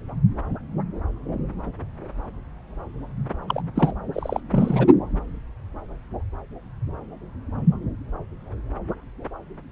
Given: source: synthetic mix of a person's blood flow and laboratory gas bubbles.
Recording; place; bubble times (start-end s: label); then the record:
Doppler ultrasound of blood flow; subclavian vein
3.48-3.62 s: bubbles
3.76-3.93 s: bubbles
4.12-4.40 s: bubbles
4.51-4.86 s: bubbles
From the record:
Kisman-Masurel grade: 212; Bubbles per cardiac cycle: several, 3 to 8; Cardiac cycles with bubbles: 1 to 10%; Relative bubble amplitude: moderate (0.250 to 0.450); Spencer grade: 1 (occasional bubble signal discernible with the cardiac motion signal, with majority of cardiac periods free of bubbles); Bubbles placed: anywhere in the cardiac cycle